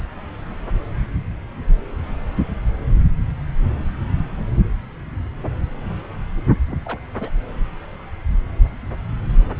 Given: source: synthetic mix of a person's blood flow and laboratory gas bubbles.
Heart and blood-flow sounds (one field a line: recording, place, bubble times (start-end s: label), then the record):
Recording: Doppler ultrasound of blood flow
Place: subclavian vein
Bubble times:
6.68-6.78 s: bubbles
6.84-6.99 s: bubbles
7.20-7.30 s: bubbles
From the record:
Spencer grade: 2 (many but less than half of the cardiac periods contain bubble signals, singularly or in groups)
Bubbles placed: anywhere in the cardiac cycle